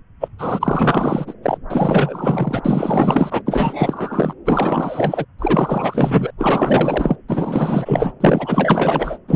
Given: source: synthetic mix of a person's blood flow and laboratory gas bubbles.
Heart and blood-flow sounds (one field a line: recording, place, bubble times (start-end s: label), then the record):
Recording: Doppler ultrasound of blood flow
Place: subclavian vein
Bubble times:
0.21-0.28 s: bubbles
0.38-1.33 s: bubbles
1.42-1.58 s: bubbles
1.70-3.42 s: bubbles
3.46-4.34 s: bubbles
4.46-5.25 s: bubbles
5.38-6.30 s: bubbles
6.38-7.17 s: bubbles
7.29-8.12 s: bubbles
8.20-9.18 s: bubbles
9.28-9.36 s: bubbles
From the record:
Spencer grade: 4 (maximum detectable bubble signal sounding continuously throughout systole and diastole of every cardiac period, and overriding the amplitude of the normal cardiac signals)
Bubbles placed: anywhere in the cardiac cycle